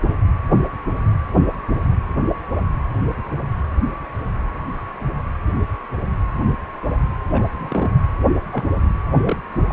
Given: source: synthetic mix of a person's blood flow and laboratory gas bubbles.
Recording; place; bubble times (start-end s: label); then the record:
Doppler ultrasound of blood flow; precordium
7.30-7.42 s: bubbles
7.58-7.91 s: bubbles
8.52-8.70 s: bubbles
9.09-9.42 s: bubbles
9.68-9.73 s: bubbles
From the record:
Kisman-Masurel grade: 122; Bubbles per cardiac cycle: 1 to 2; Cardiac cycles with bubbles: 10 to 50%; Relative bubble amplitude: moderate (0.250 to 0.450); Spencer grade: 2 (many but less than half of the cardiac periods contain bubble signals, singularly or in groups); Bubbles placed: anywhere in the cardiac cycle